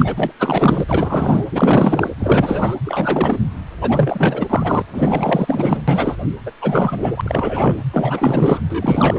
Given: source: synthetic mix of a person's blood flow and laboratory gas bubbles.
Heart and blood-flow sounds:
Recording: Doppler ultrasound of blood flow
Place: precordium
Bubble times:
0.00-0.14 s: bubbles
0.17-0.32 s: bubbles
0.40-1.46 s: bubbles
1.51-2.11 s: bubbles
2.20-2.77 s: bubbles
2.84-3.38 s: bubbles
3.80-4.82 s: bubbles
4.92-5.82 s: bubbles
5.88-6.16 s: bubbles
6.46-6.51 s: bubbles
6.61-7.21 s: bubbles
7.23-7.77 s: bubbles
7.93-8.60 s: bubbles
8.70-9.19 s: bubbles
From the record:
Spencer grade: 4 (maximum detectable bubble signal sounding continuously throughout systole and diastole of every cardiac period, and overriding the amplitude of the normal cardiac signals)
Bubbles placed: anywhere in the cardiac cycle

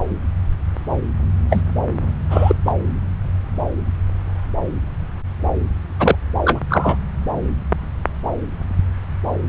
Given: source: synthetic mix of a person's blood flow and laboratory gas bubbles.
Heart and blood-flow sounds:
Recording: Doppler ultrasound of blood flow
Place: subclavian vein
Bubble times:
1.49-1.61 s: bubbles
2.30-2.55 s: bubbles
2.65-2.73 s: bubbles
5.99-6.16 s: bubbles
6.45-6.60 s: bubbles
6.70-6.98 s: bubbles
From the record:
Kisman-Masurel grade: 223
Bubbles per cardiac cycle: several, 3 to 8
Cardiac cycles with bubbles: 10 to 50%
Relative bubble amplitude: loud (0.450 to 0.775)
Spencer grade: 2 (many but less than half of the cardiac periods contain bubble signals, singularly or in groups)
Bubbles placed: anywhere in the cardiac cycle

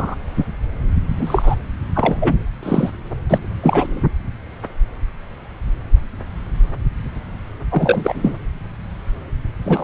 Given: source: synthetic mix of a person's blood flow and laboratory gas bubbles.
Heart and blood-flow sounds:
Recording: Doppler ultrasound of blood flow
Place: subclavian vein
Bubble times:
0.00-0.15 s: bubbles
0.38-0.44 s: bubbles
1.19-1.55 s: bubbles
1.94-2.17 s: bubbles
2.19-2.37 s: bubbles
2.62-2.90 s: bubbles
3.29-3.48 s: bubbles
3.62-4.02 s: bubbles
7.71-8.37 s: bubbles
9.64-9.84 s: bubbles
From the record:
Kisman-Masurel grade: 233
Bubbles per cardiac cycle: several, 3 to 8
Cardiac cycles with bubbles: 50 to 99%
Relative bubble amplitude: loud (0.450 to 0.775)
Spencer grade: 3 (all of the cardiac periods contain showers or single bubble signals, but not dominating or overriding the cardiac motion signals)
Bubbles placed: anywhere in the cardiac cycle

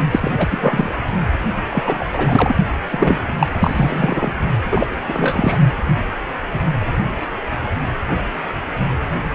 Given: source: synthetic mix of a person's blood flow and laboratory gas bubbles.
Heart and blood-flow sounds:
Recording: Doppler ultrasound of blood flow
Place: precordium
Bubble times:
0.11-0.31 s: bubbles
0.37-0.90 s: bubbles
1.68-2.06 s: bubbles
2.12-2.56 s: bubbles
2.91-3.19 s: bubbles
3.39-3.47 s: bubbles
3.59-4.32 s: bubbles
4.71-4.87 s: bubbles
5.08-5.58 s: bubbles
From the record:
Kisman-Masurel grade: 333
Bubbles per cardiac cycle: rolling drumbeat, 9 or more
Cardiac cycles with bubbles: 50 to 99%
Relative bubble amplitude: loud (0.450 to 0.775)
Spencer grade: 3 (all of the cardiac periods contain showers or single bubble signals, but not dominating or overriding the cardiac motion signals)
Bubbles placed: only in the low amplitude regions of the cardiac cycle

